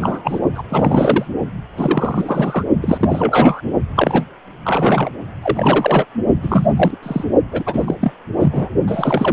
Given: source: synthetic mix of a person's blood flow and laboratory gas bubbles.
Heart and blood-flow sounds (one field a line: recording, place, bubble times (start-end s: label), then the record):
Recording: Doppler ultrasound of blood flow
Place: precordium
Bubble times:
0.00-0.42 s: bubbles
0.54-0.62 s: bubbles
0.69-1.27 s: bubbles
1.77-2.65 s: bubbles
2.81-3.61 s: bubbles
3.96-4.23 s: bubbles
4.64-5.10 s: bubbles
5.42-6.05 s: bubbles
6.42-6.97 s: bubbles
7.02-7.25 s: bubbles
7.52-7.63 s: bubbles
7.66-7.95 s: bubbles
8.01-8.12 s: bubbles
8.40-8.71 s: bubbles
8.88-9.33 s: bubbles
From the record:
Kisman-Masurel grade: 343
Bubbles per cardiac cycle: rolling drumbeat, 9 or more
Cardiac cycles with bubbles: 100%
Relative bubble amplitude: loud (0.450 to 0.775)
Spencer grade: 3 (all of the cardiac periods contain showers or single bubble signals, but not dominating or overriding the cardiac motion signals)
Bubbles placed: only in the low amplitude regions of the cardiac cycle